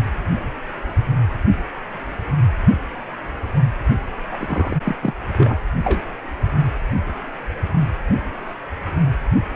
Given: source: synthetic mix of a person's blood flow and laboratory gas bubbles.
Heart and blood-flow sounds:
Doppler ultrasound of blood flow; precordium
4.32-4.77 s: bubbles
4.83-4.96 s: bubbles
5.03-5.15 s: bubbles
5.37-5.59 s: bubbles
5.83-6.01 s: bubbles
From the record:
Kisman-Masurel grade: 212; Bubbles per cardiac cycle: several, 3 to 8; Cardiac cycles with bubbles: 1 to 10%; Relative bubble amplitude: moderate (0.250 to 0.450); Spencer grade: 1 (occasional bubble signal discernible with the cardiac motion signal, with majority of cardiac periods free of bubbles); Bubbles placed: anywhere in the cardiac cycle

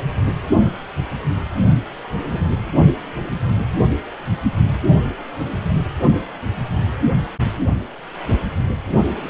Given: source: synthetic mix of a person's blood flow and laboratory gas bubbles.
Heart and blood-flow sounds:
Doppler ultrasound of blood flow; precordium
2.29-2.50 s: bubbles
From the record:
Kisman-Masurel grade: 121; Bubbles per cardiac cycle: 1 to 2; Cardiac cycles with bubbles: 10 to 50%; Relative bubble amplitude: barely perceptible (0.100 to 0.250); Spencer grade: 2 (many but less than half of the cardiac periods contain bubble signals, singularly or in groups); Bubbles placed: only in the low amplitude regions of the cardiac cycle

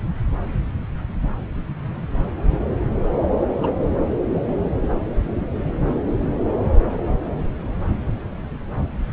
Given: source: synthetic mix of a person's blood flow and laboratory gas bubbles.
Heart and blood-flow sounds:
Doppler ultrasound of blood flow; subclavian vein
1.22-1.27 s: bubbles
3.58-3.75 s: bubbles
From the record:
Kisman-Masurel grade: 121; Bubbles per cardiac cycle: 1 to 2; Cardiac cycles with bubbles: 10 to 50%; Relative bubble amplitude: barely perceptible (0.100 to 0.250); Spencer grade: 2 (many but less than half of the cardiac periods contain bubble signals, singularly or in groups); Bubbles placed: anywhere in the cardiac cycle

